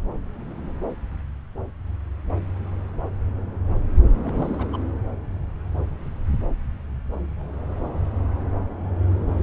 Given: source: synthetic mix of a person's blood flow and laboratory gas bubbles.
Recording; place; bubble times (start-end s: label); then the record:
Doppler ultrasound of blood flow; subclavian vein
4.24-4.67 s: bubbles
4.72-4.78 s: bubbles
From the record:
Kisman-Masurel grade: 211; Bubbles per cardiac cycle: several, 3 to 8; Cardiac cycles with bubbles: 1 to 10%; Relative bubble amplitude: barely perceptible (0.100 to 0.250); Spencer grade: 1 (occasional bubble signal discernible with the cardiac motion signal, with majority of cardiac periods free of bubbles); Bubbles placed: anywhere in the cardiac cycle